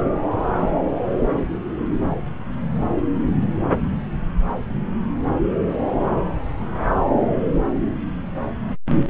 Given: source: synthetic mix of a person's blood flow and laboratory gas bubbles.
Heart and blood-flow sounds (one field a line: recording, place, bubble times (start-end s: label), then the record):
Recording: Doppler ultrasound of blood flow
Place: subclavian vein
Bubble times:
no bubbles
From the record:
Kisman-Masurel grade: 000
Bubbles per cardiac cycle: 0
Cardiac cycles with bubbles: 0%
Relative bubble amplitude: no bubbles discernible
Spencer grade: 0 (complete lack of bubble signals)